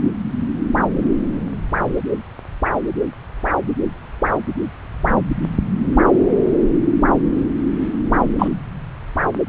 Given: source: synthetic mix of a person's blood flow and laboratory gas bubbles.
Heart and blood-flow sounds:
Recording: Doppler ultrasound of blood flow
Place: subclavian vein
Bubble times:
8.39-8.48 s: bubbles
From the record:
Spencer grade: 1 (occasional bubble signal discernible with the cardiac motion signal, with majority of cardiac periods free of bubbles)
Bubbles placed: anywhere in the cardiac cycle

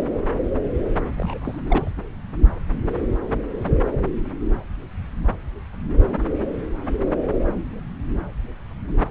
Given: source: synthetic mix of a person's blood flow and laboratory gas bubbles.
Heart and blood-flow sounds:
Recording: Doppler ultrasound of blood flow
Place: subclavian vein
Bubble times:
1.18-1.60 s: bubbles
1.69-1.91 s: bubbles
From the record:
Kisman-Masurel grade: 221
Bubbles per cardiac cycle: several, 3 to 8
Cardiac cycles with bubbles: 10 to 50%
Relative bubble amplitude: barely perceptible (0.100 to 0.250)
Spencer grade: 2 (many but less than half of the cardiac periods contain bubble signals, singularly or in groups)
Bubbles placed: anywhere in the cardiac cycle

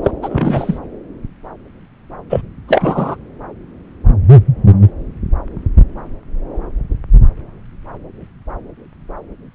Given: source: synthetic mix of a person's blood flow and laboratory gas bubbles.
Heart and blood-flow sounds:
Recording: Doppler ultrasound of blood flow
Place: subclavian vein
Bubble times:
0.03-0.11 s: bubbles
0.22-0.79 s: bubbles
2.29-2.41 s: bubbles
2.68-3.16 s: bubbles
From the record:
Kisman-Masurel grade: 223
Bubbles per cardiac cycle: several, 3 to 8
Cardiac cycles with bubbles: 10 to 50%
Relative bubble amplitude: loud (0.450 to 0.775)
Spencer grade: 2 (many but less than half of the cardiac periods contain bubble signals, singularly or in groups)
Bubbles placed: anywhere in the cardiac cycle

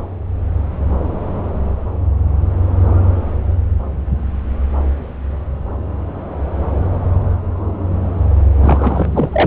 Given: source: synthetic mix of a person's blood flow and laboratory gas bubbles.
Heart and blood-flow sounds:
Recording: Doppler ultrasound of blood flow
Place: subclavian vein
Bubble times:
8.61-9.29 s: bubbles
9.32-9.46 s: bubbles
From the record:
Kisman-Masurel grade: 213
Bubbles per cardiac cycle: several, 3 to 8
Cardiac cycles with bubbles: 1 to 10%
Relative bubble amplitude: loud (0.450 to 0.775)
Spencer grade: 1 (occasional bubble signal discernible with the cardiac motion signal, with majority of cardiac periods free of bubbles)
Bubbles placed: anywhere in the cardiac cycle

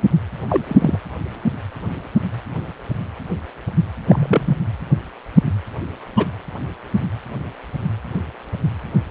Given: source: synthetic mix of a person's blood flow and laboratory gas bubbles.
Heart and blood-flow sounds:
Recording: Doppler ultrasound of blood flow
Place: precordium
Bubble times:
0.48-0.65 s: bubbles
0.68-0.99 s: bubbles
4.08-4.56 s: bubbles
6.17-6.27 s: bubbles
From the record:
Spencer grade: 2 (many but less than half of the cardiac periods contain bubble signals, singularly or in groups)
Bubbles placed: anywhere in the cardiac cycle

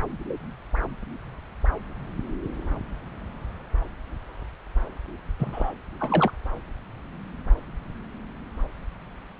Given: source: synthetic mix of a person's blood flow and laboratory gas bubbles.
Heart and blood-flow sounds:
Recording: Doppler ultrasound of blood flow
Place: subclavian vein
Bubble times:
5.40-5.72 s: bubbles
6.00-6.31 s: bubbles
From the record:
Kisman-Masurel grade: 212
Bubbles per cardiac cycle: several, 3 to 8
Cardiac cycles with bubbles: 1 to 10%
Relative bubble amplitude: moderate (0.250 to 0.450)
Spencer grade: 1 (occasional bubble signal discernible with the cardiac motion signal, with majority of cardiac periods free of bubbles)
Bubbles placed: anywhere in the cardiac cycle

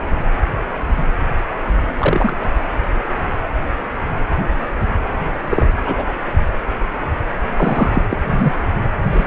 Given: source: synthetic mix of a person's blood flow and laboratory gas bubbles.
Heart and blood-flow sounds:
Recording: Doppler ultrasound of blood flow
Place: precordium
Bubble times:
1.98-2.36 s: bubbles
5.49-5.71 s: bubbles
5.85-6.04 s: bubbles
7.56-8.03 s: bubbles
8.10-8.18 s: bubbles
8.26-8.52 s: bubbles
9.11-9.27 s: bubbles
From the record:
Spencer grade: 2 (many but less than half of the cardiac periods contain bubble signals, singularly or in groups)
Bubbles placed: anywhere in the cardiac cycle

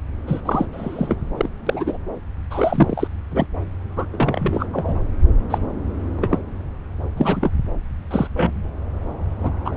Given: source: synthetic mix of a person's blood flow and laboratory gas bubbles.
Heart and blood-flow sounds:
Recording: Doppler ultrasound of blood flow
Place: subclavian vein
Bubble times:
0.27-0.41 s: bubbles
0.45-0.66 s: bubbles
0.72-1.17 s: bubbles
1.37-1.49 s: bubbles
1.67-1.97 s: bubbles
2.50-3.07 s: bubbles
3.31-3.46 s: bubbles
3.96-4.06 s: bubbles
4.12-4.66 s: bubbles
4.73-4.96 s: bubbles
5.50-5.59 s: bubbles
6.16-6.39 s: bubbles
7.17-7.50 s: bubbles
8.10-8.27 s: bubbles
8.35-8.72 s: bubbles
9.39-9.51 s: bubbles
9.64-9.77 s: bubbles
From the record:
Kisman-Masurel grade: 242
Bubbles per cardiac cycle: several, 3 to 8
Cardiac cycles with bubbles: 100%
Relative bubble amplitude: moderate (0.250 to 0.450)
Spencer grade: 3 (all of the cardiac periods contain showers or single bubble signals, but not dominating or overriding the cardiac motion signals)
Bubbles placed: anywhere in the cardiac cycle

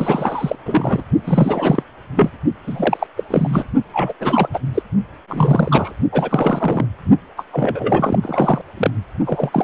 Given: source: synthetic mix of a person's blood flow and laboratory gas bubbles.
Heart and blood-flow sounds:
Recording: Doppler ultrasound of blood flow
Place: precordium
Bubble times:
0.00-0.56 s: bubbles
0.65-1.02 s: bubbles
1.24-1.83 s: bubbles
2.16-2.30 s: bubbles
2.67-3.07 s: bubbles
3.17-3.24 s: bubbles
3.30-3.64 s: bubbles
3.94-4.13 s: bubbles
4.21-4.49 s: bubbles
4.54-4.58 s: bubbles
4.74-4.83 s: bubbles
5.29-5.96 s: bubbles
6.12-6.85 s: bubbles
7.37-7.45 s: bubbles
7.51-8.19 s: bubbles
8.21-8.61 s: bubbles
8.77-8.90 s: bubbles
9.24-9.64 s: bubbles
From the record:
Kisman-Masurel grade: 342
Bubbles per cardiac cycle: rolling drumbeat, 9 or more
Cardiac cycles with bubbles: 100%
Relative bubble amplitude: moderate (0.250 to 0.450)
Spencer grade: 3 (all of the cardiac periods contain showers or single bubble signals, but not dominating or overriding the cardiac motion signals)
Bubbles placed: only in the low amplitude regions of the cardiac cycle

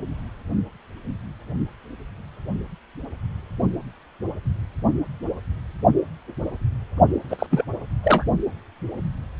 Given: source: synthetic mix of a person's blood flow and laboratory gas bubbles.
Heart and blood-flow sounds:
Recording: Doppler ultrasound of blood flow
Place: precordium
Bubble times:
7.29-7.47 s: bubbles
7.51-7.65 s: bubbles
8.03-8.24 s: bubbles
From the record:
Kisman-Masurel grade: 222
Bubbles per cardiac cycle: several, 3 to 8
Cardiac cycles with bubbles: 10 to 50%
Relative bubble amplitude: moderate (0.250 to 0.450)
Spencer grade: 2 (many but less than half of the cardiac periods contain bubble signals, singularly or in groups)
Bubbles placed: only in the low amplitude regions of the cardiac cycle

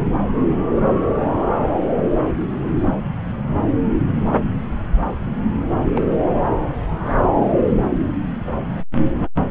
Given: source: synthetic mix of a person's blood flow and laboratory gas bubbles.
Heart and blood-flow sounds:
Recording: Doppler ultrasound of blood flow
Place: subclavian vein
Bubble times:
5.96-6.09 s: bubbles
From the record:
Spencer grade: 2 (many but less than half of the cardiac periods contain bubble signals, singularly or in groups)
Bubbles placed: anywhere in the cardiac cycle

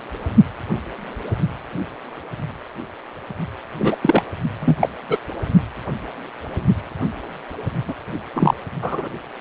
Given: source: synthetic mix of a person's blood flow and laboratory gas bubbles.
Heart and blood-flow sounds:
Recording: Doppler ultrasound of blood flow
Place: precordium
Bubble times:
3.79-3.96 s: bubbles
4.01-4.23 s: bubbles
4.60-4.75 s: bubbles
4.79-4.89 s: bubbles
5.09-5.18 s: bubbles
7.87-7.94 s: bubbles
8.33-8.54 s: bubbles
8.82-9.09 s: bubbles
From the record:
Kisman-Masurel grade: 223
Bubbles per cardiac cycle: several, 3 to 8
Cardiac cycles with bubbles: 10 to 50%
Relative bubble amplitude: loud (0.450 to 0.775)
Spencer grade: 2 (many but less than half of the cardiac periods contain bubble signals, singularly or in groups)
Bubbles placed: only in the low amplitude regions of the cardiac cycle

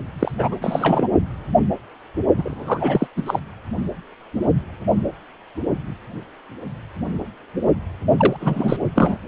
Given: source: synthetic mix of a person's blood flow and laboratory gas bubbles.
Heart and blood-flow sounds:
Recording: Doppler ultrasound of blood flow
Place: precordium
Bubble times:
0.19-0.32 s: bubbles
0.38-0.55 s: bubbles
0.61-1.11 s: bubbles
2.36-3.07 s: bubbles
3.16-3.23 s: bubbles
3.25-3.40 s: bubbles
8.17-8.37 s: bubbles
8.40-8.76 s: bubbles
8.95-9.17 s: bubbles
From the record:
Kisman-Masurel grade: 333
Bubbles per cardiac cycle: rolling drumbeat, 9 or more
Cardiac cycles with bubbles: 50 to 99%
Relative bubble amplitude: loud (0.450 to 0.775)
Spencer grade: 3 (all of the cardiac periods contain showers or single bubble signals, but not dominating or overriding the cardiac motion signals)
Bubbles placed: only in the low amplitude regions of the cardiac cycle

